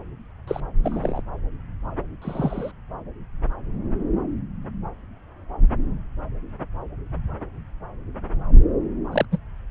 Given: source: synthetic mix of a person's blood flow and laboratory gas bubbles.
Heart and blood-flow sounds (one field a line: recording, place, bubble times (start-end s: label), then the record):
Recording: Doppler ultrasound of blood flow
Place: subclavian vein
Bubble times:
0.47-0.60 s: bubbles
0.84-1.23 s: bubbles
2.21-2.71 s: bubbles
9.12-9.25 s: bubbles
9.31-9.38 s: bubbles
From the record:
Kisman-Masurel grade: 122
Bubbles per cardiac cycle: 1 to 2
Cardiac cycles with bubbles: 10 to 50%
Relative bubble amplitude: moderate (0.250 to 0.450)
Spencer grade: 2 (many but less than half of the cardiac periods contain bubble signals, singularly or in groups)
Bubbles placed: anywhere in the cardiac cycle